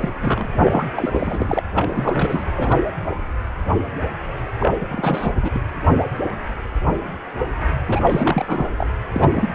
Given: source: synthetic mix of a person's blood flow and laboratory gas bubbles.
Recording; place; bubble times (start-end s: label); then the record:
Doppler ultrasound of blood flow; precordium
0.00-0.11 s: bubbles
0.22-0.47 s: bubbles
0.63-0.86 s: bubbles
0.97-1.63 s: bubbles
1.74-2.46 s: bubbles
2.56-2.79 s: bubbles
4.59-4.71 s: bubbles
4.80-4.86 s: bubbles
4.91-5.33 s: bubbles
5.42-5.59 s: bubbles
7.88-8.70 s: bubbles
8.77-8.87 s: bubbles
9.12-9.49 s: bubbles
From the record:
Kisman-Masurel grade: 332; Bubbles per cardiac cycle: rolling drumbeat, 9 or more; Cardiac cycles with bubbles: 50 to 99%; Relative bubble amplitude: moderate (0.250 to 0.450); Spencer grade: 3 (all of the cardiac periods contain showers or single bubble signals, but not dominating or overriding the cardiac motion signals); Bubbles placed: anywhere in the cardiac cycle